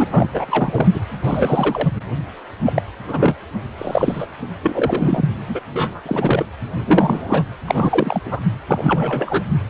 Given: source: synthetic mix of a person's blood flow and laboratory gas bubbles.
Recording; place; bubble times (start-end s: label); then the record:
Doppler ultrasound of blood flow; precordium
0.00-0.04 s: bubbles
0.11-0.28 s: bubbles
0.34-0.87 s: bubbles
0.94-1.00 s: bubbles
1.24-1.89 s: bubbles
2.65-2.82 s: bubbles
3.06-3.35 s: bubbles
3.77-4.27 s: bubbles
4.62-5.34 s: bubbles
5.48-5.61 s: bubbles
5.76-6.01 s: bubbles
6.06-6.46 s: bubbles
6.87-7.44 s: bubbles
7.67-8.21 s: bubbles
8.25-8.40 s: bubbles
8.67-9.43 s: bubbles
From the record:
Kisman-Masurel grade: 243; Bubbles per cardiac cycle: several, 3 to 8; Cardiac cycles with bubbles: 100%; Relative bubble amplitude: loud (0.450 to 0.775); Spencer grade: 3 (all of the cardiac periods contain showers or single bubble signals, but not dominating or overriding the cardiac motion signals); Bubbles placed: anywhere in the cardiac cycle